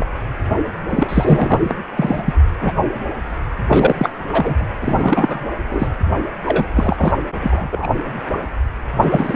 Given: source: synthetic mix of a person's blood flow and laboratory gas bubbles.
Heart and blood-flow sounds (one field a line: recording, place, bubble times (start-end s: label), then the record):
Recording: Doppler ultrasound of blood flow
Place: precordium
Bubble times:
0.00-0.05 s: bubbles
0.90-1.76 s: bubbles
1.97-2.34 s: bubbles
2.58-2.80 s: bubbles
3.68-4.09 s: bubbles
4.32-4.68 s: bubbles
4.81-5.47 s: bubbles
5.69-5.88 s: bubbles
6.45-6.65 s: bubbles
6.76-7.13 s: bubbles
7.40-7.69 s: bubbles
7.71-7.87 s: bubbles
9.01-9.36 s: bubbles
From the record:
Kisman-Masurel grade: 333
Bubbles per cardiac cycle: rolling drumbeat, 9 or more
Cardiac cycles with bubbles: 50 to 99%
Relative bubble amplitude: loud (0.450 to 0.775)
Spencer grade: 3 (all of the cardiac periods contain showers or single bubble signals, but not dominating or overriding the cardiac motion signals)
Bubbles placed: anywhere in the cardiac cycle